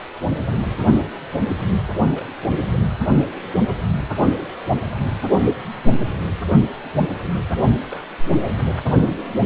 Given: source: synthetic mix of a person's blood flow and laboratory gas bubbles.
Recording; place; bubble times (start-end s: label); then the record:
Doppler ultrasound of blood flow; precordium
2.15-2.25 s: bubbles
2.44-2.61 s: bubbles
7.85-8.03 s: bubbles
From the record:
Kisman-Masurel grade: 121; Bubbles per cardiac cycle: 1 to 2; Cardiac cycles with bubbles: 10 to 50%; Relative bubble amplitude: barely perceptible (0.100 to 0.250); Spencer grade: 2 (many but less than half of the cardiac periods contain bubble signals, singularly or in groups); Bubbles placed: anywhere in the cardiac cycle